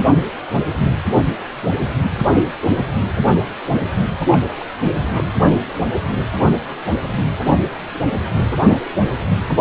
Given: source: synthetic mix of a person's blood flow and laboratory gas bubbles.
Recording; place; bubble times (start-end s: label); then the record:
Doppler ultrasound of blood flow; precordium
4.31-4.38 s: bubbles
4.61-4.66 s: bubbles
5.12-5.24 s: bubbles
From the record:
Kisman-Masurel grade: 212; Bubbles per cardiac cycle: several, 3 to 8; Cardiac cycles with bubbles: 1 to 10%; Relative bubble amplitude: moderate (0.250 to 0.450); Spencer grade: 1 (occasional bubble signal discernible with the cardiac motion signal, with majority of cardiac periods free of bubbles); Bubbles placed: anywhere in the cardiac cycle